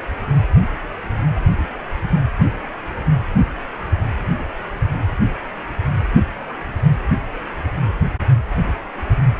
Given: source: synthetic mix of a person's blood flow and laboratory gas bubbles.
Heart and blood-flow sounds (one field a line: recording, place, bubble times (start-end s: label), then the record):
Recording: Doppler ultrasound of blood flow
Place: precordium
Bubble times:
no bubbles
From the record:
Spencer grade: 0 (complete lack of bubble signals)